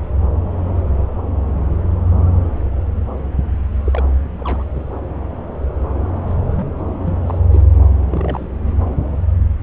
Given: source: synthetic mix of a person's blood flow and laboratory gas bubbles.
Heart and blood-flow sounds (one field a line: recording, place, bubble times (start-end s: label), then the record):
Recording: Doppler ultrasound of blood flow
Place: subclavian vein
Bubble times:
3.85-4.14 s: bubbles
4.37-4.64 s: bubbles
4.75-4.84 s: bubbles
6.27-6.35 s: bubbles
6.47-6.78 s: bubbles
7.05-7.18 s: bubbles
7.26-7.39 s: bubbles
7.51-7.62 s: bubbles
8.10-8.48 s: bubbles
8.65-8.71 s: bubbles
From the record:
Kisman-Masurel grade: 221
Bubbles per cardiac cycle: several, 3 to 8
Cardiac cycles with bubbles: 10 to 50%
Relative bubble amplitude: barely perceptible (0.100 to 0.250)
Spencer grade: 2 (many but less than half of the cardiac periods contain bubble signals, singularly or in groups)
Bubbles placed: anywhere in the cardiac cycle